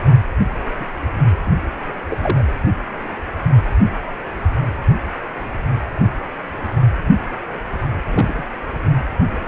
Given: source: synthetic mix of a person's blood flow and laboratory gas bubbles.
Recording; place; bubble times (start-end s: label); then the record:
Doppler ultrasound of blood flow; precordium
0.79-0.86 s: bubbles
1.35-1.50 s: bubbles
2.10-2.45 s: bubbles
8.04-8.43 s: bubbles
From the record:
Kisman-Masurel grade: 122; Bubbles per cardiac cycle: 1 to 2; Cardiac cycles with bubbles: 10 to 50%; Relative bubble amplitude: moderate (0.250 to 0.450); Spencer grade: 2 (many but less than half of the cardiac periods contain bubble signals, singularly or in groups); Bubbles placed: anywhere in the cardiac cycle